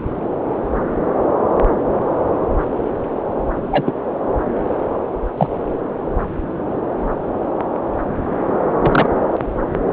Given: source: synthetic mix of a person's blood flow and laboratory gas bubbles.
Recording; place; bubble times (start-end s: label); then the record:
Doppler ultrasound of blood flow; subclavian vein
3.62-3.96 s: bubbles
5.37-5.47 s: bubbles
8.81-9.10 s: bubbles
From the record:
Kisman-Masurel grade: 123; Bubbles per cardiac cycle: 1 to 2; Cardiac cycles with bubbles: 10 to 50%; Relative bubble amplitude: loud (0.450 to 0.775); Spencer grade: 2 (many but less than half of the cardiac periods contain bubble signals, singularly or in groups); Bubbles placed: anywhere in the cardiac cycle